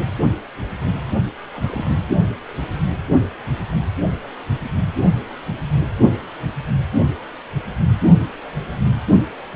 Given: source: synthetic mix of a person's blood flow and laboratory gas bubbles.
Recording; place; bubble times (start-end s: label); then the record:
Doppler ultrasound of blood flow; precordium
1.54-1.92 s: bubbles
From the record:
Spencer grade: 1 (occasional bubble signal discernible with the cardiac motion signal, with majority of cardiac periods free of bubbles); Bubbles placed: only in the low amplitude regions of the cardiac cycle